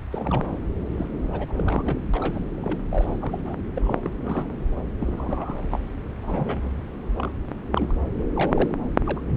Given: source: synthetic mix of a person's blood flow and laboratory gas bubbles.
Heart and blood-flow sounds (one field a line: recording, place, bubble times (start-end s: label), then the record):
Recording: Doppler ultrasound of blood flow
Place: subclavian vein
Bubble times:
0.10-0.57 s: bubbles
0.92-1.06 s: bubbles
1.32-1.99 s: bubbles
2.13-2.45 s: bubbles
2.56-2.78 s: bubbles
2.91-3.17 s: bubbles
3.21-3.42 s: bubbles
3.45-3.55 s: bubbles
3.75-4.10 s: bubbles
4.24-4.53 s: bubbles
5.00-5.58 s: bubbles
5.62-5.83 s: bubbles
6.22-6.71 s: bubbles
7.15-7.31 s: bubbles
7.71-7.94 s: bubbles
8.33-8.79 s: bubbles
9.04-9.21 s: bubbles
9.27-9.31 s: bubbles
From the record:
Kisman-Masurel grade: 242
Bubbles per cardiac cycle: several, 3 to 8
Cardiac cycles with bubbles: 100%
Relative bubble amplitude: moderate (0.250 to 0.450)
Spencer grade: 3 (all of the cardiac periods contain showers or single bubble signals, but not dominating or overriding the cardiac motion signals)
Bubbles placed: anywhere in the cardiac cycle